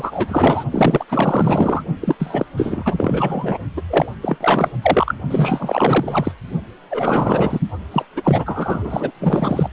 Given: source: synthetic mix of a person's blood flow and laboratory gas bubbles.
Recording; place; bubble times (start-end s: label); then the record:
Doppler ultrasound of blood flow; precordium
0.00-0.65 s: bubbles
0.71-1.05 s: bubbles
1.09-1.83 s: bubbles
2.00-2.16 s: bubbles
2.19-2.46 s: bubbles
2.56-3.58 s: bubbles
3.77-3.82 s: bubbles
3.88-4.12 s: bubbles
4.22-4.38 s: bubbles
4.41-4.70 s: bubbles
4.82-5.14 s: bubbles
5.29-6.32 s: bubbles
6.88-7.60 s: bubbles
7.91-8.05 s: bubbles
8.16-9.12 s: bubbles
9.20-9.69 s: bubbles
From the record:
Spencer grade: 4 (maximum detectable bubble signal sounding continuously throughout systole and diastole of every cardiac period, and overriding the amplitude of the normal cardiac signals); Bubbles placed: only in the low amplitude regions of the cardiac cycle